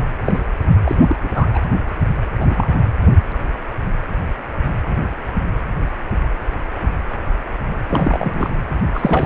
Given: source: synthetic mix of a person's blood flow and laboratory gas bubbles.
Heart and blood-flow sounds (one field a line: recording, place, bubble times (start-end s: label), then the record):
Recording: Doppler ultrasound of blood flow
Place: precordium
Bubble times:
0.24-0.39 s: bubbles
0.85-1.16 s: bubbles
1.24-1.29 s: bubbles
1.33-1.46 s: bubbles
1.53-1.59 s: bubbles
2.41-2.79 s: bubbles
7.89-8.50 s: bubbles
8.93-9.26 s: bubbles
From the record:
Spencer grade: 2 (many but less than half of the cardiac periods contain bubble signals, singularly or in groups)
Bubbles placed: anywhere in the cardiac cycle